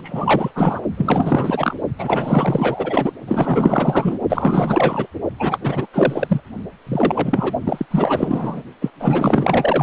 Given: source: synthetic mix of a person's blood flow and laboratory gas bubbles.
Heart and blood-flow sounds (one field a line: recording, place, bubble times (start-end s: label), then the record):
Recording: Doppler ultrasound of blood flow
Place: precordium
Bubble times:
0.00-0.52 s: bubbles
0.55-0.82 s: bubbles
0.97-1.75 s: bubbles
1.99-3.12 s: bubbles
3.28-4.19 s: bubbles
4.29-5.06 s: bubbles
5.39-5.58 s: bubbles
5.60-5.86 s: bubbles
5.93-6.41 s: bubbles
6.86-7.53 s: bubbles
7.64-7.85 s: bubbles
7.90-8.62 s: bubbles
8.81-8.91 s: bubbles
8.99-9.82 s: bubbles
From the record:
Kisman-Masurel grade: 444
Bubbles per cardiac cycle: continuous sound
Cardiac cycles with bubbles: 100%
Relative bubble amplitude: maximal (0.775 to 0.999)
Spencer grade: 4 (maximum detectable bubble signal sounding continuously throughout systole and diastole of every cardiac period, and overriding the amplitude of the normal cardiac signals)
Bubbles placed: only in the low amplitude regions of the cardiac cycle